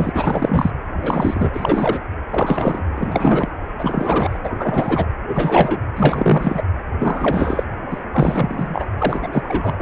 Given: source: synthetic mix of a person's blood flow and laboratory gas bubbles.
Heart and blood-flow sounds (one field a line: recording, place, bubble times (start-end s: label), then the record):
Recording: Doppler ultrasound of blood flow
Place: precordium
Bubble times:
0.00-0.12 s: bubbles
0.14-0.71 s: bubbles
1.01-2.04 s: bubbles
2.31-2.85 s: bubbles
2.95-3.58 s: bubbles
3.79-4.38 s: bubbles
4.43-5.06 s: bubbles
5.28-5.80 s: bubbles
5.96-6.62 s: bubbles
6.99-7.63 s: bubbles
7.90-8.01 s: bubbles
8.12-8.87 s: bubbles
8.98-9.29 s: bubbles
9.32-9.75 s: bubbles
9.78-9.82 s: bubbles
From the record:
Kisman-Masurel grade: 343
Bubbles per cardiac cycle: rolling drumbeat, 9 or more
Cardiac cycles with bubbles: 100%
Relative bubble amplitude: loud (0.450 to 0.775)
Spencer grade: 3 (all of the cardiac periods contain showers or single bubble signals, but not dominating or overriding the cardiac motion signals)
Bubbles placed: anywhere in the cardiac cycle